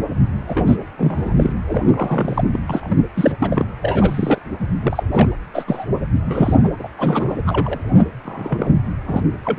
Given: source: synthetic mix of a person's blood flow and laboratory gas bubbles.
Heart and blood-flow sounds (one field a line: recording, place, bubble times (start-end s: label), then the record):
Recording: Doppler ultrasound of blood flow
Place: precordium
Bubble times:
0.47-0.62 s: bubbles
0.66-0.76 s: bubbles
0.97-1.33 s: bubbles
1.37-1.53 s: bubbles
1.67-2.44 s: bubbles
2.52-2.59 s: bubbles
2.67-2.98 s: bubbles
3.14-3.32 s: bubbles
3.40-3.65 s: bubbles
3.82-4.38 s: bubbles
4.59-4.66 s: bubbles
4.81-5.03 s: bubbles
5.12-5.28 s: bubbles
5.54-5.64 s: bubbles
5.67-5.86 s: bubbles
6.25-6.71 s: bubbles
6.79-6.88 s: bubbles
6.98-7.35 s: bubbles
7.46-8.04 s: bubbles
8.25-8.74 s: bubbles
9.07-9.23 s: bubbles
9.44-9.59 s: bubbles
From the record:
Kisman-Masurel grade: 242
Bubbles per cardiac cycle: several, 3 to 8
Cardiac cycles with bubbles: 100%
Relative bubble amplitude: moderate (0.250 to 0.450)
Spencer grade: 3 (all of the cardiac periods contain showers or single bubble signals, but not dominating or overriding the cardiac motion signals)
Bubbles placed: anywhere in the cardiac cycle